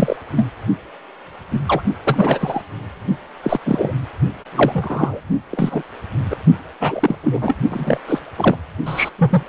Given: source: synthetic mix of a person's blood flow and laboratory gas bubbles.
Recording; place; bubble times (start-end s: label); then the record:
Doppler ultrasound of blood flow; precordium
0.00-0.16 s: bubbles
0.36-0.49 s: bubbles
1.52-1.60 s: bubbles
1.66-1.82 s: bubbles
2.04-2.62 s: bubbles
3.42-3.60 s: bubbles
3.65-3.94 s: bubbles
4.52-5.20 s: bubbles
5.51-5.82 s: bubbles
6.30-6.37 s: bubbles
6.80-7.16 s: bubbles
7.23-7.55 s: bubbles
7.69-7.98 s: bubbles
8.07-8.19 s: bubbles
8.37-8.56 s: bubbles
8.86-9.10 s: bubbles
9.18-9.43 s: bubbles
From the record:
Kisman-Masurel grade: 243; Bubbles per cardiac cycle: several, 3 to 8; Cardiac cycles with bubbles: 100%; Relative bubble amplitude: loud (0.450 to 0.775); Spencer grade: 3 (all of the cardiac periods contain showers or single bubble signals, but not dominating or overriding the cardiac motion signals); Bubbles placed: only in the low amplitude regions of the cardiac cycle